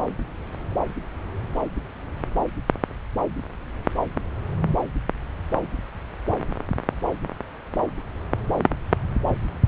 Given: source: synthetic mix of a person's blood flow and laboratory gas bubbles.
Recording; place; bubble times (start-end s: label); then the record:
Doppler ultrasound of blood flow; subclavian vein
no bubbles
From the record:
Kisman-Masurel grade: 000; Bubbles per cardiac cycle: 0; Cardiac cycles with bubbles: 0%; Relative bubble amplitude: no bubbles discernible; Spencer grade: 0 (complete lack of bubble signals)